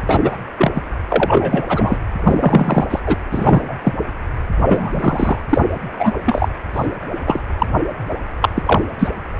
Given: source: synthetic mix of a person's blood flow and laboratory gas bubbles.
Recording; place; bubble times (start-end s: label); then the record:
Doppler ultrasound of blood flow; precordium
0.06-0.37 s: bubbles
0.58-0.72 s: bubbles
0.74-0.82 s: bubbles
1.08-1.65 s: bubbles
1.68-1.98 s: bubbles
2.24-2.85 s: bubbles
2.90-3.00 s: bubbles
3.06-3.17 s: bubbles
3.31-3.75 s: bubbles
3.84-3.94 s: bubbles
4.67-5.38 s: bubbles
5.49-5.62 s: bubbles
5.99-6.12 s: bubbles
6.25-6.49 s: bubbles
6.73-6.87 s: bubbles
7.26-7.41 s: bubbles
7.58-7.67 s: bubbles
8.41-8.48 s: bubbles
8.55-8.62 s: bubbles
8.65-8.81 s: bubbles
8.98-9.08 s: bubbles
From the record:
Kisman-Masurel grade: 243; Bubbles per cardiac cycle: several, 3 to 8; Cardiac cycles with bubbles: 100%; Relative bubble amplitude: loud (0.450 to 0.775); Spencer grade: 3 (all of the cardiac periods contain showers or single bubble signals, but not dominating or overriding the cardiac motion signals); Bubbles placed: anywhere in the cardiac cycle